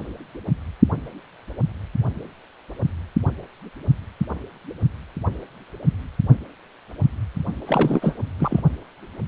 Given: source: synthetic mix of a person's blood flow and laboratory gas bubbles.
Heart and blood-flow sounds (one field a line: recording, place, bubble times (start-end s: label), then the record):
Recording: Doppler ultrasound of blood flow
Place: precordium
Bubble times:
7.67-8.15 s: bubbles
8.39-8.61 s: bubbles
From the record:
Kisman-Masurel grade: 212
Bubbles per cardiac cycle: several, 3 to 8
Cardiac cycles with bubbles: 1 to 10%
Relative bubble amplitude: moderate (0.250 to 0.450)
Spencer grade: 1 (occasional bubble signal discernible with the cardiac motion signal, with majority of cardiac periods free of bubbles)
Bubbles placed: only in the low amplitude regions of the cardiac cycle